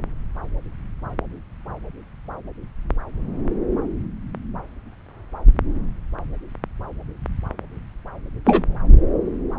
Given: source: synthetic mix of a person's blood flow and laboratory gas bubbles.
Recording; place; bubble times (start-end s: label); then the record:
Doppler ultrasound of blood flow; subclavian vein
8.45-8.65 s: bubbles
From the record:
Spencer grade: 1 (occasional bubble signal discernible with the cardiac motion signal, with majority of cardiac periods free of bubbles); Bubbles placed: anywhere in the cardiac cycle